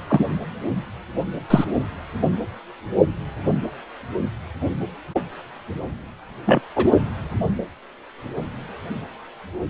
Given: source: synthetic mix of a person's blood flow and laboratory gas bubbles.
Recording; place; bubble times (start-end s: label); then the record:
Doppler ultrasound of blood flow; precordium
0.09-0.26 s: bubbles
1.50-1.64 s: bubbles
6.46-6.60 s: bubbles
6.75-6.86 s: bubbles
From the record:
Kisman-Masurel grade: 123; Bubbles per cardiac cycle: 1 to 2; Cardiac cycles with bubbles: 10 to 50%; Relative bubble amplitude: loud (0.450 to 0.775); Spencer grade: 2 (many but less than half of the cardiac periods contain bubble signals, singularly or in groups); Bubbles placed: anywhere in the cardiac cycle